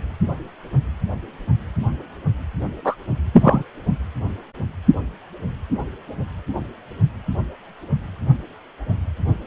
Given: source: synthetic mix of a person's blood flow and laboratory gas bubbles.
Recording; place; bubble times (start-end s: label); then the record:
Doppler ultrasound of blood flow; precordium
2.84-2.95 s: bubbles
3.33-3.63 s: bubbles
From the record:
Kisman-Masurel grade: 213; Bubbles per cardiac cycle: several, 3 to 8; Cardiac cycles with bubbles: 1 to 10%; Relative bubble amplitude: loud (0.450 to 0.775); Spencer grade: 1 (occasional bubble signal discernible with the cardiac motion signal, with majority of cardiac periods free of bubbles); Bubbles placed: only in the low amplitude regions of the cardiac cycle